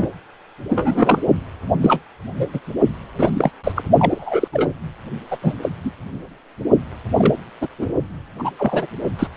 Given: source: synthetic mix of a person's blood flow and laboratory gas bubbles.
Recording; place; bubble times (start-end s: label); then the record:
Doppler ultrasound of blood flow; precordium
0.00-0.11 s: bubbles
0.70-1.18 s: bubbles
1.82-2.01 s: bubbles
2.37-2.48 s: bubbles
2.53-2.60 s: bubbles
3.18-3.30 s: bubbles
3.35-3.52 s: bubbles
3.64-3.72 s: bubbles
3.75-3.82 s: bubbles
3.99-4.48 s: bubbles
4.53-4.73 s: bubbles
5.31-5.37 s: bubbles
5.42-5.54 s: bubbles
5.62-5.70 s: bubbles
5.84-5.91 s: bubbles
7.18-7.35 s: bubbles
7.61-7.68 s: bubbles
7.78-7.86 s: bubbles
8.38-8.50 s: bubbles
8.57-8.86 s: bubbles
9.18-9.27 s: bubbles
From the record:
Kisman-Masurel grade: 243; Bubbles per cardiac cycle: several, 3 to 8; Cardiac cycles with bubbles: 100%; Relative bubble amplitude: loud (0.450 to 0.775); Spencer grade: 3 (all of the cardiac periods contain showers or single bubble signals, but not dominating or overriding the cardiac motion signals); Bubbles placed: only in the low amplitude regions of the cardiac cycle